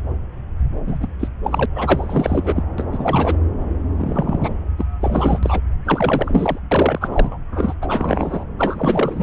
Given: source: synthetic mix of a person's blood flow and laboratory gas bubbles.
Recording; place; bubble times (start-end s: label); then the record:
Doppler ultrasound of blood flow; subclavian vein
0.86-1.06 s: bubbles
1.19-1.28 s: bubbles
1.44-1.66 s: bubbles
1.74-2.63 s: bubbles
2.78-2.85 s: bubbles
2.92-3.37 s: bubbles
3.98-4.56 s: bubbles
4.78-4.85 s: bubbles
5.00-5.39 s: bubbles
5.42-5.60 s: bubbles
5.85-6.59 s: bubbles
6.71-7.38 s: bubbles
7.52-7.73 s: bubbles
7.81-8.44 s: bubbles
8.58-9.23 s: bubbles
From the record:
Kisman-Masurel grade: 342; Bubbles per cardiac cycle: rolling drumbeat, 9 or more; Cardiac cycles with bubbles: 100%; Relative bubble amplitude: moderate (0.250 to 0.450); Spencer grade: 3 (all of the cardiac periods contain showers or single bubble signals, but not dominating or overriding the cardiac motion signals); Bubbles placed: anywhere in the cardiac cycle